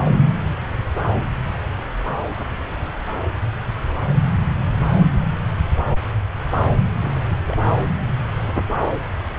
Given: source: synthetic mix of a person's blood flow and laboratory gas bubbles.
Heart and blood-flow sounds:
Doppler ultrasound of blood flow; subclavian vein
7.05-7.19 s: bubbles
7.45-7.57 s: bubbles
From the record:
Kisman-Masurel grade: 111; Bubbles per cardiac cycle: 1 to 2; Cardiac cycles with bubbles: 1 to 10%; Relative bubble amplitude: barely perceptible (0.100 to 0.250); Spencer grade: 1 (occasional bubble signal discernible with the cardiac motion signal, with majority of cardiac periods free of bubbles); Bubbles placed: anywhere in the cardiac cycle

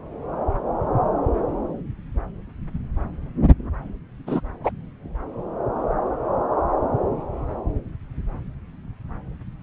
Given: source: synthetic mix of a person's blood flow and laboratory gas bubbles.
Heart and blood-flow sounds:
Doppler ultrasound of blood flow; subclavian vein
4.26-4.40 s: bubbles
4.63-4.71 s: bubbles
From the record:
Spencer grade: 1 (occasional bubble signal discernible with the cardiac motion signal, with majority of cardiac periods free of bubbles); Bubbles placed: anywhere in the cardiac cycle

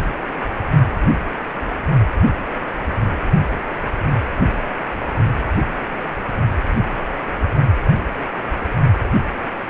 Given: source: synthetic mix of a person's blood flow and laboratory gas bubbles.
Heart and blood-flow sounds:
Doppler ultrasound of blood flow; precordium
no bubbles
From the record:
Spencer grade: 0 (complete lack of bubble signals)

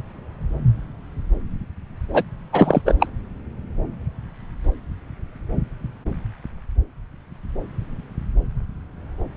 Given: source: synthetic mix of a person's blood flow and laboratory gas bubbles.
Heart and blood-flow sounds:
Doppler ultrasound of blood flow; subclavian vein
2.13-2.23 s: bubbles
2.52-2.81 s: bubbles
2.85-2.94 s: bubbles
2.99-3.06 s: bubbles
From the record:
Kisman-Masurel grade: 223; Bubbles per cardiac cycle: several, 3 to 8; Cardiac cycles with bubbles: 10 to 50%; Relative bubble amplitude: loud (0.450 to 0.775); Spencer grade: 2 (many but less than half of the cardiac periods contain bubble signals, singularly or in groups); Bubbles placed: anywhere in the cardiac cycle

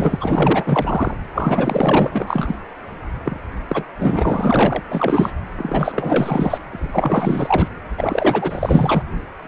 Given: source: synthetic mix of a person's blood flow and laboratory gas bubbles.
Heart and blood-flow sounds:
Doppler ultrasound of blood flow; precordium
0.00-0.17 s: bubbles
0.20-1.15 s: bubbles
1.35-2.56 s: bubbles
3.24-3.40 s: bubbles
3.69-3.84 s: bubbles
3.98-4.83 s: bubbles
4.91-5.34 s: bubbles
5.57-6.58 s: bubbles
6.73-7.68 s: bubbles
7.97-9.02 s: bubbles
9.45-9.48 s: bubbles
From the record:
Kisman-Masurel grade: 444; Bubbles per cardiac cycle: continuous sound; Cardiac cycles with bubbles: 100%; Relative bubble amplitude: maximal (0.775 to 0.999); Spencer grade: 4 (maximum detectable bubble signal sounding continuously throughout systole and diastole of every cardiac period, and overriding the amplitude of the normal cardiac signals); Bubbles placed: anywhere in the cardiac cycle

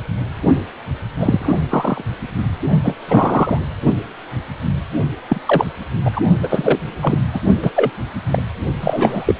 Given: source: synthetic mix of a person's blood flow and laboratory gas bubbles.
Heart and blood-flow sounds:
Doppler ultrasound of blood flow; precordium
1.18-1.57 s: bubbles
1.70-2.02 s: bubbles
2.83-2.95 s: bubbles
3.08-3.58 s: bubbles
5.28-5.41 s: bubbles
5.46-5.66 s: bubbles
6.04-6.21 s: bubbles
6.43-6.78 s: bubbles
7.03-7.21 s: bubbles
7.33-7.40 s: bubbles
7.62-7.71 s: bubbles
7.76-7.91 s: bubbles
8.29-8.43 s: bubbles
8.80-9.35 s: bubbles
9.38-9.40 s: bubbles
From the record:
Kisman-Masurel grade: 233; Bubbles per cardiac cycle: several, 3 to 8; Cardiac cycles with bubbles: 50 to 99%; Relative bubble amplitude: loud (0.450 to 0.775); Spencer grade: 3 (all of the cardiac periods contain showers or single bubble signals, but not dominating or overriding the cardiac motion signals); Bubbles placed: only in the low amplitude regions of the cardiac cycle

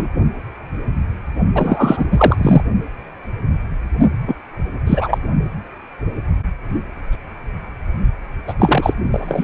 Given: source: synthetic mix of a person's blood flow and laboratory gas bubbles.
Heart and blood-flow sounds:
Doppler ultrasound of blood flow; precordium
0.00-0.08 s: bubbles
1.55-2.06 s: bubbles
2.10-2.62 s: bubbles
4.27-4.34 s: bubbles
4.87-5.18 s: bubbles
8.47-8.54 s: bubbles
8.59-8.94 s: bubbles
9.12-9.44 s: bubbles
From the record:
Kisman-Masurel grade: 223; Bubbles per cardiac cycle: several, 3 to 8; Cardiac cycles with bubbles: 10 to 50%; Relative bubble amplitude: loud (0.450 to 0.775); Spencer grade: 2 (many but less than half of the cardiac periods contain bubble signals, singularly or in groups); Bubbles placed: only in the low amplitude regions of the cardiac cycle

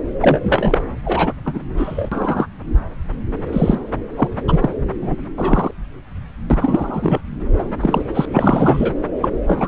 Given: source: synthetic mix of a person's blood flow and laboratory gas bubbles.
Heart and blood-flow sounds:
Doppler ultrasound of blood flow; subclavian vein
0.21-0.40 s: bubbles
0.44-0.84 s: bubbles
1.04-1.33 s: bubbles
1.45-1.62 s: bubbles
1.77-2.09 s: bubbles
2.12-2.47 s: bubbles
3.52-3.81 s: bubbles
4.16-4.28 s: bubbles
4.47-4.73 s: bubbles
5.01-5.15 s: bubbles
5.37-5.71 s: bubbles
6.50-7.18 s: bubbles
7.58-7.64 s: bubbles
7.80-8.01 s: bubbles
8.14-8.26 s: bubbles
8.32-8.93 s: bubbles
9.21-9.29 s: bubbles
9.47-9.67 s: bubbles
From the record:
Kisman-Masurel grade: 243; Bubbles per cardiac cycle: several, 3 to 8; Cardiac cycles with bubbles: 100%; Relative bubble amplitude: loud (0.450 to 0.775); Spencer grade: 3 (all of the cardiac periods contain showers or single bubble signals, but not dominating or overriding the cardiac motion signals); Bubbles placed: anywhere in the cardiac cycle

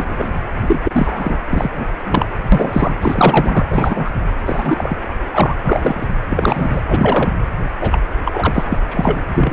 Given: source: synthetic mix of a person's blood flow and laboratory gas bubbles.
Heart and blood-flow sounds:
Doppler ultrasound of blood flow; precordium
0.00-0.29 s: bubbles
0.62-0.79 s: bubbles
0.84-1.38 s: bubbles
1.49-1.70 s: bubbles
1.76-1.85 s: bubbles
2.05-2.25 s: bubbles
2.52-2.94 s: bubbles
3.02-3.65 s: bubbles
3.71-4.11 s: bubbles
4.45-4.97 s: bubbles
5.27-5.55 s: bubbles
5.64-6.06 s: bubbles
6.30-6.82 s: bubbles
6.89-7.31 s: bubbles
7.80-7.99 s: bubbles
8.25-8.63 s: bubbles
8.69-8.79 s: bubbles
8.88-9.24 s: bubbles
9.34-9.52 s: bubbles
From the record:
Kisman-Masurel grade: 243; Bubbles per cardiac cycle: several, 3 to 8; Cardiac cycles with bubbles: 100%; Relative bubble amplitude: loud (0.450 to 0.775); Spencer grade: 3 (all of the cardiac periods contain showers or single bubble signals, but not dominating or overriding the cardiac motion signals); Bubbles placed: anywhere in the cardiac cycle

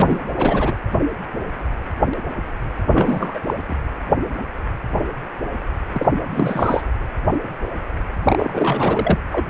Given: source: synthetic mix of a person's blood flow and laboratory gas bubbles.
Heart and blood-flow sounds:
Doppler ultrasound of blood flow; precordium
0.00-0.30 s: bubbles
0.35-0.75 s: bubbles
2.92-3.39 s: bubbles
3.46-3.54 s: bubbles
3.68-3.75 s: bubbles
5.92-6.09 s: bubbles
6.30-6.82 s: bubbles
8.23-9.18 s: bubbles
9.31-9.47 s: bubbles
From the record:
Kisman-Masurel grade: 332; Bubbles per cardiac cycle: rolling drumbeat, 9 or more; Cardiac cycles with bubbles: 50 to 99%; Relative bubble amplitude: moderate (0.250 to 0.450); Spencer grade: 3 (all of the cardiac periods contain showers or single bubble signals, but not dominating or overriding the cardiac motion signals); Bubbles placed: anywhere in the cardiac cycle

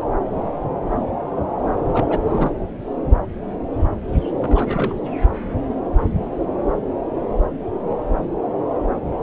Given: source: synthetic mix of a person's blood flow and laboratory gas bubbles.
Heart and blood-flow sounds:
Doppler ultrasound of blood flow; subclavian vein
1.88-2.19 s: bubbles
2.25-2.51 s: bubbles
4.40-4.94 s: bubbles
From the record:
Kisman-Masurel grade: 221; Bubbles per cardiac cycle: several, 3 to 8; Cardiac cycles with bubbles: 10 to 50%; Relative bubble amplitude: barely perceptible (0.100 to 0.250); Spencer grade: 2 (many but less than half of the cardiac periods contain bubble signals, singularly or in groups); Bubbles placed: anywhere in the cardiac cycle

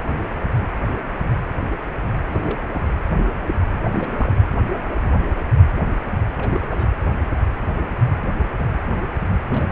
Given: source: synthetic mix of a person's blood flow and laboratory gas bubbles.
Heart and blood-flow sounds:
Doppler ultrasound of blood flow; precordium
2.27-2.61 s: bubbles
2.72-2.85 s: bubbles
3.86-4.32 s: bubbles
6.37-6.93 s: bubbles
9.48-9.72 s: bubbles
From the record:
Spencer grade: 2 (many but less than half of the cardiac periods contain bubble signals, singularly or in groups); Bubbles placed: anywhere in the cardiac cycle

